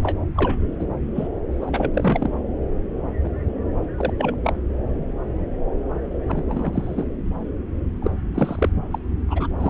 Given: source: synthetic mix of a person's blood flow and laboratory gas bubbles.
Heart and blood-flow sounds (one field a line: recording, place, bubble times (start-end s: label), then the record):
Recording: Doppler ultrasound of blood flow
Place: subclavian vein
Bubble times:
0.02-0.15 s: bubbles
0.36-0.66 s: bubbles
0.79-0.85 s: bubbles
1.15-1.28 s: bubbles
1.61-2.30 s: bubbles
3.23-3.29 s: bubbles
3.97-4.13 s: bubbles
4.18-4.36 s: bubbles
4.43-4.53 s: bubbles
6.27-7.04 s: bubbles
8.02-8.11 s: bubbles
8.34-8.69 s: bubbles
8.91-8.99 s: bubbles
9.28-9.47 s: bubbles
9.60-9.70 s: bubbles
From the record:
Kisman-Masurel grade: 232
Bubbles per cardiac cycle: several, 3 to 8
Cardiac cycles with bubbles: 50 to 99%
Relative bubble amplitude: moderate (0.250 to 0.450)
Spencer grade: 3 (all of the cardiac periods contain showers or single bubble signals, but not dominating or overriding the cardiac motion signals)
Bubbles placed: anywhere in the cardiac cycle